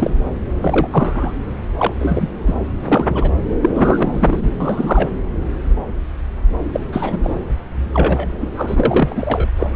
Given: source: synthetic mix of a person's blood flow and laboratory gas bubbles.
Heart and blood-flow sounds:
Doppler ultrasound of blood flow; subclavian vein
0.00-0.10 s: bubbles
0.60-0.88 s: bubbles
0.91-1.33 s: bubbles
1.77-1.93 s: bubbles
1.99-2.27 s: bubbles
2.47-2.55 s: bubbles
2.84-3.35 s: bubbles
3.62-3.71 s: bubbles
3.75-4.49 s: bubbles
4.60-5.08 s: bubbles
6.73-6.80 s: bubbles
6.92-7.19 s: bubbles
7.23-7.30 s: bubbles
7.93-8.27 s: bubbles
8.42-8.47 s: bubbles
8.55-9.47 s: bubbles
9.59-9.67 s: bubbles
9.73-9.76 s: bubbles
From the record:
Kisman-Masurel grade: 233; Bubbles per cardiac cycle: several, 3 to 8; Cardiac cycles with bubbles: 50 to 99%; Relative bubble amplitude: loud (0.450 to 0.775); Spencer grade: 3 (all of the cardiac periods contain showers or single bubble signals, but not dominating or overriding the cardiac motion signals); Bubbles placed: anywhere in the cardiac cycle

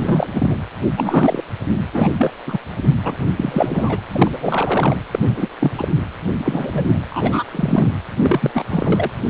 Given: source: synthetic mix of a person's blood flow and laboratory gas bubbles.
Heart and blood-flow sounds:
Doppler ultrasound of blood flow; precordium
0.00-0.56 s: bubbles
0.96-1.45 s: bubbles
1.92-2.10 s: bubbles
2.18-2.32 s: bubbles
2.46-2.58 s: bubbles
3.04-3.15 s: bubbles
3.36-4.02 s: bubbles
4.09-4.96 s: bubbles
5.11-5.19 s: bubbles
5.21-5.49 s: bubbles
5.60-5.88 s: bubbles
6.39-6.99 s: bubbles
7.10-7.44 s: bubbles
7.51-7.91 s: bubbles
8.20-8.51 s: bubbles
8.54-8.65 s: bubbles
8.69-9.12 s: bubbles
From the record:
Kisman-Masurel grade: 243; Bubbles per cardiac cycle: several, 3 to 8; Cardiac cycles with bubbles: 100%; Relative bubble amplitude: loud (0.450 to 0.775); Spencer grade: 3 (all of the cardiac periods contain showers or single bubble signals, but not dominating or overriding the cardiac motion signals); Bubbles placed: anywhere in the cardiac cycle

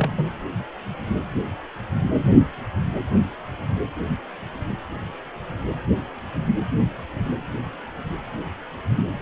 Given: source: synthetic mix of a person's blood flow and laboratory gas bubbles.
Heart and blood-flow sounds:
Doppler ultrasound of blood flow; precordium
0.00-0.11 s: bubbles
0.16-0.26 s: bubbles
From the record:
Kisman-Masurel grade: 111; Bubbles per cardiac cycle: 1 to 2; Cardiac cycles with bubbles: 1 to 10%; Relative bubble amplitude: barely perceptible (0.100 to 0.250); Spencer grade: 1 (occasional bubble signal discernible with the cardiac motion signal, with majority of cardiac periods free of bubbles); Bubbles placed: anywhere in the cardiac cycle

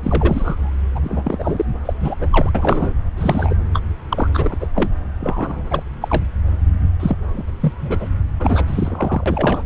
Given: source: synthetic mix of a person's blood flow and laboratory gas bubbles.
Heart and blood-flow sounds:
Doppler ultrasound of blood flow; subclavian vein
0.02-0.72 s: bubbles
0.95-1.00 s: bubbles
1.03-1.66 s: bubbles
1.85-1.93 s: bubbles
2.02-2.15 s: bubbles
2.18-2.51 s: bubbles
2.55-2.94 s: bubbles
3.16-3.56 s: bubbles
3.74-3.81 s: bubbles
4.08-4.28 s: bubbles
4.34-4.56 s: bubbles
4.60-4.67 s: bubbles
4.75-4.89 s: bubbles
5.21-5.63 s: bubbles
5.70-5.83 s: bubbles
5.93-5.95 s: bubbles
6.01-6.23 s: bubbles
7.00-7.17 s: bubbles
7.33-7.44 s: bubbles
7.47-7.50 s: bubbles
7.60-7.73 s: bubbles
7.81-8.08 s: bubbles
8.39-9.66 s: bubbles
From the record:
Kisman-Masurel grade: 243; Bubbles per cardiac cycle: several, 3 to 8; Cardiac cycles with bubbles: 100%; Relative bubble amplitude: loud (0.450 to 0.775); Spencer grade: 3 (all of the cardiac periods contain showers or single bubble signals, but not dominating or overriding the cardiac motion signals); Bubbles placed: anywhere in the cardiac cycle

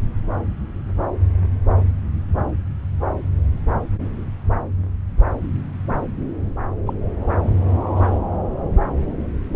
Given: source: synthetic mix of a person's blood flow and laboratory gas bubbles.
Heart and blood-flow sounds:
Doppler ultrasound of blood flow; subclavian vein
6.86-6.94 s: bubbles
7.96-8.19 s: bubbles
From the record:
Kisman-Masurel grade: 122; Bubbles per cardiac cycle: 1 to 2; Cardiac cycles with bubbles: 10 to 50%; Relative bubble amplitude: moderate (0.250 to 0.450); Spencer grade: 2 (many but less than half of the cardiac periods contain bubble signals, singularly or in groups); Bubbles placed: anywhere in the cardiac cycle

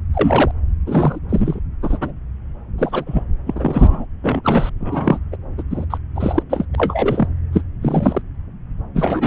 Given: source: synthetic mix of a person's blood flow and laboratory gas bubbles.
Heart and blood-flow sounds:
Doppler ultrasound of blood flow; subclavian vein
0.14-0.51 s: bubbles
0.86-1.20 s: bubbles
1.29-1.60 s: bubbles
1.83-2.12 s: bubbles
2.78-3.22 s: bubbles
3.46-4.05 s: bubbles
4.22-4.41 s: bubbles
4.44-4.70 s: bubbles
4.80-5.19 s: bubbles
5.32-5.36 s: bubbles
5.58-5.62 s: bubbles
5.70-5.85 s: bubbles
5.90-5.97 s: bubbles
6.15-6.42 s: bubbles
6.50-6.65 s: bubbles
6.73-6.75 s: bubbles
6.78-7.27 s: bubbles
7.53-7.62 s: bubbles
7.81-8.22 s: bubbles
8.95-9.27 s: bubbles
From the record:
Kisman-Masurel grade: 233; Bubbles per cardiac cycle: several, 3 to 8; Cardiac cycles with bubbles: 50 to 99%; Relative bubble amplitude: loud (0.450 to 0.775); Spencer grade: 3 (all of the cardiac periods contain showers or single bubble signals, but not dominating or overriding the cardiac motion signals); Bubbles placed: anywhere in the cardiac cycle

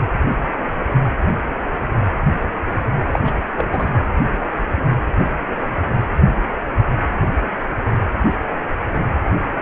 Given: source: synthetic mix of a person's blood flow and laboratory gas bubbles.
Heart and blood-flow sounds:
Doppler ultrasound of blood flow; precordium
3.12-3.20 s: bubbles
3.23-3.33 s: bubbles
3.57-3.65 s: bubbles
3.72-3.88 s: bubbles
From the record:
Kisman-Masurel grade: 212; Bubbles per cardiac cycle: several, 3 to 8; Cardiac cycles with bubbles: 1 to 10%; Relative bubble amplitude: moderate (0.250 to 0.450); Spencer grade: 1 (occasional bubble signal discernible with the cardiac motion signal, with majority of cardiac periods free of bubbles); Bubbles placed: anywhere in the cardiac cycle

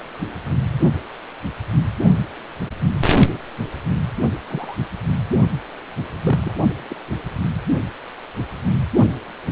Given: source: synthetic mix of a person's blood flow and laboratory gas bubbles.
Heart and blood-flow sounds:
Doppler ultrasound of blood flow; precordium
4.46-4.76 s: bubbles
6.24-6.54 s: bubbles
6.88-6.96 s: bubbles
From the record:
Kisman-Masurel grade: 121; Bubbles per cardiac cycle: 1 to 2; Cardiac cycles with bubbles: 10 to 50%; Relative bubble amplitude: barely perceptible (0.100 to 0.250); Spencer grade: 2 (many but less than half of the cardiac periods contain bubble signals, singularly or in groups); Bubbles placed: only in the low amplitude regions of the cardiac cycle

